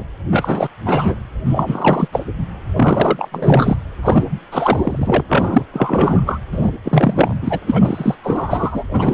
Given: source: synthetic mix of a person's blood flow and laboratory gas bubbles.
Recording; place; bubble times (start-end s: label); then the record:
Doppler ultrasound of blood flow; precordium
0.00-0.03 s: bubbles
0.31-0.68 s: bubbles
0.85-1.15 s: bubbles
1.45-2.08 s: bubbles
2.12-2.24 s: bubbles
2.75-3.29 s: bubbles
3.32-3.78 s: bubbles
4.03-4.25 s: bubbles
4.51-5.24 s: bubbles
5.28-5.64 s: bubbles
5.73-6.39 s: bubbles
6.51-6.71 s: bubbles
6.84-7.36 s: bubbles
7.42-7.59 s: bubbles
7.67-8.15 s: bubbles
8.23-8.84 s: bubbles
8.90-9.14 s: bubbles
From the record:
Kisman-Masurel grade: 343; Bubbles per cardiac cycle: rolling drumbeat, 9 or more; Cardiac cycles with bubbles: 100%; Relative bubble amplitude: loud (0.450 to 0.775); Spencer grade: 3 (all of the cardiac periods contain showers or single bubble signals, but not dominating or overriding the cardiac motion signals); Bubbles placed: anywhere in the cardiac cycle